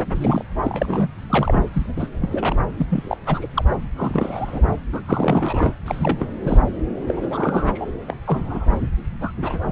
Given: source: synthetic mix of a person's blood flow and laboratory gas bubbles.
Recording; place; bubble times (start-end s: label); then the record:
Doppler ultrasound of blood flow; subclavian vein
0.15-0.43 s: bubbles
0.62-1.08 s: bubbles
1.29-1.62 s: bubbles
1.73-1.87 s: bubbles
1.96-2.08 s: bubbles
2.22-2.54 s: bubbles
2.78-2.87 s: bubbles
2.90-3.17 s: bubbles
3.26-3.47 s: bubbles
3.54-3.65 s: bubbles
3.96-4.67 s: bubbles
4.92-5.01 s: bubbles
5.06-5.74 s: bubbles
5.85-6.17 s: bubbles
6.20-6.28 s: bubbles
6.41-6.61 s: bubbles
7.08-7.88 s: bubbles
8.07-8.16 s: bubbles
8.26-8.72 s: bubbles
9.21-9.31 s: bubbles
9.41-9.61 s: bubbles
From the record:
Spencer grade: 3 (all of the cardiac periods contain showers or single bubble signals, but not dominating or overriding the cardiac motion signals); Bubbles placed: anywhere in the cardiac cycle